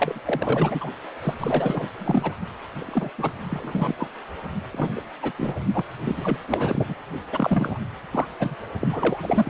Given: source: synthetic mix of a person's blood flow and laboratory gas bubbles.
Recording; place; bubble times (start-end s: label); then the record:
Doppler ultrasound of blood flow; precordium
0.00-0.20 s: bubbles
0.25-0.90 s: bubbles
1.23-1.34 s: bubbles
1.39-1.93 s: bubbles
1.98-2.34 s: bubbles
2.77-3.10 s: bubbles
3.18-3.46 s: bubbles
3.50-3.95 s: bubbles
3.98-4.08 s: bubbles
4.73-5.01 s: bubbles
5.22-5.32 s: bubbles
5.37-5.54 s: bubbles
5.74-5.85 s: bubbles
6.04-6.38 s: bubbles
6.47-6.95 s: bubbles
7.32-7.80 s: bubbles
8.12-8.26 s: bubbles
8.39-8.55 s: bubbles
8.80-9.18 s: bubbles
9.23-9.50 s: bubbles
From the record:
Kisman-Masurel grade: 342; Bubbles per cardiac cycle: rolling drumbeat, 9 or more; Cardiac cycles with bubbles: 100%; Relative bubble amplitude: moderate (0.250 to 0.450); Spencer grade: 3 (all of the cardiac periods contain showers or single bubble signals, but not dominating or overriding the cardiac motion signals); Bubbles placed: only in the low amplitude regions of the cardiac cycle